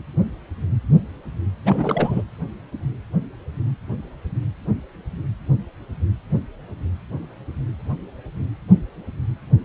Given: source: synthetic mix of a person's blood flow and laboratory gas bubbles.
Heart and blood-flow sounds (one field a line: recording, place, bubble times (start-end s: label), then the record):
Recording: Doppler ultrasound of blood flow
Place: precordium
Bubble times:
1.65-2.23 s: bubbles
From the record:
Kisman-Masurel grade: 212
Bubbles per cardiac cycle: several, 3 to 8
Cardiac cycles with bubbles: 1 to 10%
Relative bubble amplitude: moderate (0.250 to 0.450)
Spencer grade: 1 (occasional bubble signal discernible with the cardiac motion signal, with majority of cardiac periods free of bubbles)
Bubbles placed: anywhere in the cardiac cycle